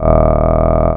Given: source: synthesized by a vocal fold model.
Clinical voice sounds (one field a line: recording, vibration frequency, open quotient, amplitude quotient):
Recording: sustained vowel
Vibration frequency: 40 Hz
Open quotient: 0.5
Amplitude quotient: 1.4